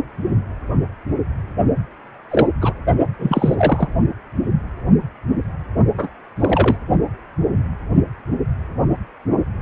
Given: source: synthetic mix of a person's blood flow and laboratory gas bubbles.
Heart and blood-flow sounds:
Doppler ultrasound of blood flow; precordium
2.30-2.47 s: bubbles
2.61-2.73 s: bubbles
3.19-3.88 s: bubbles
5.98-6.08 s: bubbles
6.38-6.77 s: bubbles
From the record:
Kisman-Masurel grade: 223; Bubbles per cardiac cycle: several, 3 to 8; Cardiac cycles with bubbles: 10 to 50%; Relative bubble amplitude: loud (0.450 to 0.775); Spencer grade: 2 (many but less than half of the cardiac periods contain bubble signals, singularly or in groups); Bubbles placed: only in the low amplitude regions of the cardiac cycle

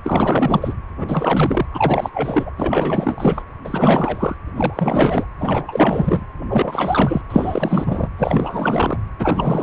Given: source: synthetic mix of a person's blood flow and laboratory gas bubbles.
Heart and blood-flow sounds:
Doppler ultrasound of blood flow; precordium
0.04-0.74 s: bubbles
0.98-1.66 s: bubbles
1.71-2.10 s: bubbles
2.14-2.51 s: bubbles
2.57-3.43 s: bubbles
3.64-4.37 s: bubbles
4.55-5.25 s: bubbles
5.39-6.25 s: bubbles
6.50-7.21 s: bubbles
7.29-8.09 s: bubbles
8.18-9.00 s: bubbles
9.19-9.63 s: bubbles
From the record:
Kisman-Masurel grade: 444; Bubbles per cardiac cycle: continuous sound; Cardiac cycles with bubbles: 100%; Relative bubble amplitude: maximal (0.775 to 0.999); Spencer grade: 4 (maximum detectable bubble signal sounding continuously throughout systole and diastole of every cardiac period, and overriding the amplitude of the normal cardiac signals); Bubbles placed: anywhere in the cardiac cycle

